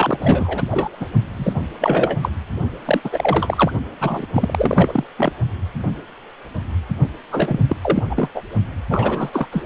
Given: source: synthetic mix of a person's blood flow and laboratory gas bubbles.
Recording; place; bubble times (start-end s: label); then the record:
Doppler ultrasound of blood flow; precordium
0.00-0.20 s: bubbles
0.22-0.62 s: bubbles
0.69-1.06 s: bubbles
1.36-1.61 s: bubbles
1.80-2.17 s: bubbles
2.21-2.29 s: bubbles
2.85-3.01 s: bubbles
3.04-3.71 s: bubbles
4.00-4.26 s: bubbles
4.33-5.04 s: bubbles
5.16-5.33 s: bubbles
7.31-7.60 s: bubbles
7.69-7.77 s: bubbles
7.82-8.03 s: bubbles
8.10-8.29 s: bubbles
8.35-8.43 s: bubbles
8.89-9.30 s: bubbles
9.32-9.47 s: bubbles
9.52-9.64 s: bubbles
From the record:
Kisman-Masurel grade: 333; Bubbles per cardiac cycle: rolling drumbeat, 9 or more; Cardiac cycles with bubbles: 50 to 99%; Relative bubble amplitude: loud (0.450 to 0.775); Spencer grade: 3 (all of the cardiac periods contain showers or single bubble signals, but not dominating or overriding the cardiac motion signals); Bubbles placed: only in the low amplitude regions of the cardiac cycle